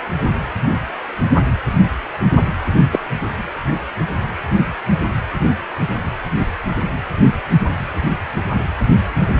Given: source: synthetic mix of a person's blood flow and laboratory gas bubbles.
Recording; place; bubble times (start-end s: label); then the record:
Doppler ultrasound of blood flow; precordium
2.92-2.98 s: bubbles
From the record:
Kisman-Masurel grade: 123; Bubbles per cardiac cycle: 1 to 2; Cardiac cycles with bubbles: 10 to 50%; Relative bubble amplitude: loud (0.450 to 0.775); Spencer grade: 2 (many but less than half of the cardiac periods contain bubble signals, singularly or in groups); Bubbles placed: anywhere in the cardiac cycle